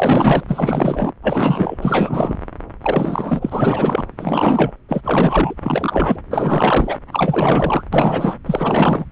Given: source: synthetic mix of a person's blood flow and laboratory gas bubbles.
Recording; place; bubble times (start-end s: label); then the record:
Doppler ultrasound of blood flow; subclavian vein
0.00-0.43 s: bubbles
0.47-1.12 s: bubbles
1.22-1.78 s: bubbles
1.81-2.38 s: bubbles
2.82-4.05 s: bubbles
4.20-4.71 s: bubbles
4.89-5.01 s: bubbles
5.04-5.54 s: bubbles
5.62-6.20 s: bubbles
6.30-6.99 s: bubbles
7.12-7.83 s: bubbles
7.92-8.34 s: bubbles
8.46-9.05 s: bubbles
From the record:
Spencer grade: 4 (maximum detectable bubble signal sounding continuously throughout systole and diastole of every cardiac period, and overriding the amplitude of the normal cardiac signals); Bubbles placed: anywhere in the cardiac cycle